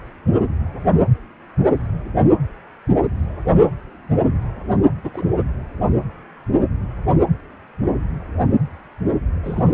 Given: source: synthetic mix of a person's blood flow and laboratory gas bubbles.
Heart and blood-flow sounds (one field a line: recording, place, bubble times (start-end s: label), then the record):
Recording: Doppler ultrasound of blood flow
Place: precordium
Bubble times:
5.04-5.11 s: bubbles
5.13-5.25 s: bubbles
9.44-9.64 s: bubbles
From the record:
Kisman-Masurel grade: 112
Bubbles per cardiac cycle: 1 to 2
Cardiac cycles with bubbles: 1 to 10%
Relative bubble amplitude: moderate (0.250 to 0.450)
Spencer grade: 1 (occasional bubble signal discernible with the cardiac motion signal, with majority of cardiac periods free of bubbles)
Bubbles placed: anywhere in the cardiac cycle